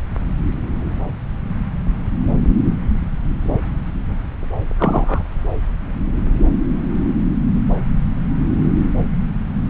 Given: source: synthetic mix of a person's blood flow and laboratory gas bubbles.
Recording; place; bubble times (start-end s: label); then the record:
Doppler ultrasound of blood flow; subclavian vein
4.79-5.23 s: bubbles
From the record:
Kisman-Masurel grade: 113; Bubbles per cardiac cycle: 1 to 2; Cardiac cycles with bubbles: 1 to 10%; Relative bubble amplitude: loud (0.450 to 0.775); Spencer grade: 1 (occasional bubble signal discernible with the cardiac motion signal, with majority of cardiac periods free of bubbles); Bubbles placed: anywhere in the cardiac cycle